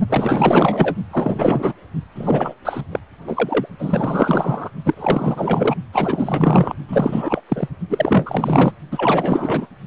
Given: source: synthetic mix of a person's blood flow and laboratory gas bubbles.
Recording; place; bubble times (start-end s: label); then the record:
Doppler ultrasound of blood flow; precordium
0.09-0.95 s: bubbles
1.11-1.73 s: bubbles
2.15-2.54 s: bubbles
2.65-2.81 s: bubbles
2.92-3.00 s: bubbles
3.27-3.67 s: bubbles
3.79-4.70 s: bubbles
4.85-5.75 s: bubbles
5.92-6.75 s: bubbles
6.88-7.41 s: bubbles
7.48-7.69 s: bubbles
7.90-8.72 s: bubbles
8.92-9.67 s: bubbles
From the record:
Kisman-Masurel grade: 444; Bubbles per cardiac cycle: continuous sound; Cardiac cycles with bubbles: 100%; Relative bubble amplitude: maximal (0.775 to 0.999); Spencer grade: 4 (maximum detectable bubble signal sounding continuously throughout systole and diastole of every cardiac period, and overriding the amplitude of the normal cardiac signals); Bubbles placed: only in the low amplitude regions of the cardiac cycle